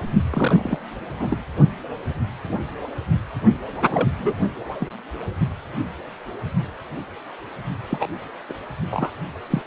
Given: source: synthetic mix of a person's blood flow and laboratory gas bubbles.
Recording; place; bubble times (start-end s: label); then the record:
Doppler ultrasound of blood flow; precordium
0.30-0.77 s: bubbles
1.19-1.27 s: bubbles
1.30-1.43 s: bubbles
3.81-4.08 s: bubbles
4.18-4.34 s: bubbles
4.79-4.87 s: bubbles
7.89-8.08 s: bubbles
8.49-8.53 s: bubbles
8.91-9.10 s: bubbles
9.50-9.62 s: bubbles
From the record:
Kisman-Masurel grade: 232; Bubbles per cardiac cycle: several, 3 to 8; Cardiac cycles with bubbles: 50 to 99%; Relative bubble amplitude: moderate (0.250 to 0.450); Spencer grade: 3 (all of the cardiac periods contain showers or single bubble signals, but not dominating or overriding the cardiac motion signals); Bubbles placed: only in the low amplitude regions of the cardiac cycle